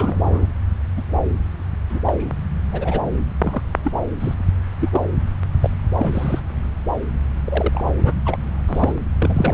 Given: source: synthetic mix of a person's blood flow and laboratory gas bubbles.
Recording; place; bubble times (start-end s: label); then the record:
Doppler ultrasound of blood flow; subclavian vein
0.00-0.46 s: bubbles
0.96-1.01 s: bubbles
1.90-2.00 s: bubbles
2.06-2.41 s: bubbles
2.72-3.00 s: bubbles
3.40-3.61 s: bubbles
3.84-3.92 s: bubbles
4.19-4.34 s: bubbles
4.80-4.89 s: bubbles
4.92-5.00 s: bubbles
5.62-5.70 s: bubbles
5.97-6.41 s: bubbles
7.45-7.84 s: bubbles
7.98-8.20 s: bubbles
8.25-8.39 s: bubbles
8.67-8.93 s: bubbles
9.19-9.53 s: bubbles
From the record:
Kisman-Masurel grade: 242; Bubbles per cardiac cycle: several, 3 to 8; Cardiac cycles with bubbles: 100%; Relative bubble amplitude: moderate (0.250 to 0.450); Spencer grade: 3 (all of the cardiac periods contain showers or single bubble signals, but not dominating or overriding the cardiac motion signals); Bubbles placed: anywhere in the cardiac cycle